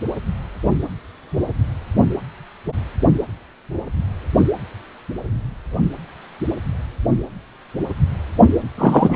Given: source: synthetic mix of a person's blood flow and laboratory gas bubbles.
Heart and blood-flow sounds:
Doppler ultrasound of blood flow; precordium
8.78-9.16 s: bubbles
From the record:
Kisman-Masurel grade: 213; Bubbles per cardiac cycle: several, 3 to 8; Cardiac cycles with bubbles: 1 to 10%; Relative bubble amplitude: loud (0.450 to 0.775); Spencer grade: 1 (occasional bubble signal discernible with the cardiac motion signal, with majority of cardiac periods free of bubbles); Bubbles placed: only in the low amplitude regions of the cardiac cycle

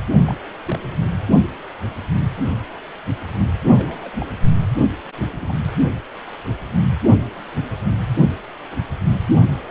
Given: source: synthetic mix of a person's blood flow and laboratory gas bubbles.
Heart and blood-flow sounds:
Doppler ultrasound of blood flow; precordium
0.26-0.34 s: bubbles
0.67-0.79 s: bubbles
2.18-2.24 s: bubbles
3.76-4.10 s: bubbles
4.19-4.26 s: bubbles
5.33-5.54 s: bubbles
From the record:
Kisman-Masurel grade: 121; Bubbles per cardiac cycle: 1 to 2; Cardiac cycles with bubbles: 10 to 50%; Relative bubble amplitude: barely perceptible (0.100 to 0.250); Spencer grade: 2 (many but less than half of the cardiac periods contain bubble signals, singularly or in groups); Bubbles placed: anywhere in the cardiac cycle

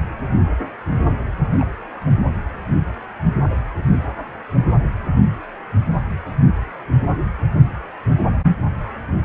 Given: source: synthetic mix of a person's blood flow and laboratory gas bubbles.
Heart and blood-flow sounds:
Doppler ultrasound of blood flow; precordium
1.58-1.69 s: bubbles
3.43-3.48 s: bubbles
From the record:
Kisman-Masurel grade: 121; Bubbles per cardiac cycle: 1 to 2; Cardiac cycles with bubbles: 10 to 50%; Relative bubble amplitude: barely perceptible (0.100 to 0.250); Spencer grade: 2 (many but less than half of the cardiac periods contain bubble signals, singularly or in groups); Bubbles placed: only in the low amplitude regions of the cardiac cycle

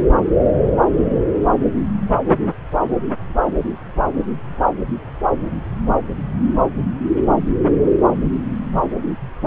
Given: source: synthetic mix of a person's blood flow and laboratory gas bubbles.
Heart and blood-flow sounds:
Doppler ultrasound of blood flow; subclavian vein
no bubbles
From the record:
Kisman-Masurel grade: 000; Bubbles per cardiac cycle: 0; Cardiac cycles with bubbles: 0%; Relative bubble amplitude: no bubbles discernible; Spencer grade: 0 (complete lack of bubble signals)

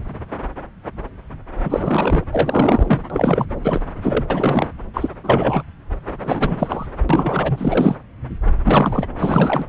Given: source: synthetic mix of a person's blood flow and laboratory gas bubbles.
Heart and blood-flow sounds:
Doppler ultrasound of blood flow; subclavian vein
1.63-2.24 s: bubbles
2.32-3.03 s: bubbles
3.09-3.45 s: bubbles
3.63-3.81 s: bubbles
4.03-4.24 s: bubbles
4.30-4.68 s: bubbles
4.94-5.08 s: bubbles
5.24-5.62 s: bubbles
6.22-6.87 s: bubbles
7.09-7.97 s: bubbles
8.63-9.06 s: bubbles
9.19-9.64 s: bubbles
From the record:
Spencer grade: 3 (all of the cardiac periods contain showers or single bubble signals, but not dominating or overriding the cardiac motion signals); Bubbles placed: anywhere in the cardiac cycle

